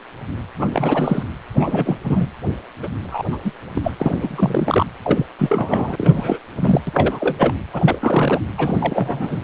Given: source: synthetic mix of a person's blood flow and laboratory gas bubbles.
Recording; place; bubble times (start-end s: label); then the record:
Doppler ultrasound of blood flow; precordium
0.57-1.23 s: bubbles
1.49-1.99 s: bubbles
2.04-2.28 s: bubbles
2.82-2.88 s: bubbles
3.03-3.39 s: bubbles
3.44-3.52 s: bubbles
3.75-3.92 s: bubbles
3.99-4.87 s: bubbles
5.03-5.26 s: bubbles
5.38-6.39 s: bubbles
6.56-6.81 s: bubbles
6.87-7.36 s: bubbles
7.38-7.54 s: bubbles
7.73-7.98 s: bubbles
8.01-8.39 s: bubbles
8.57-9.39 s: bubbles
From the record:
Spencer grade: 3 (all of the cardiac periods contain showers or single bubble signals, but not dominating or overriding the cardiac motion signals); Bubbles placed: anywhere in the cardiac cycle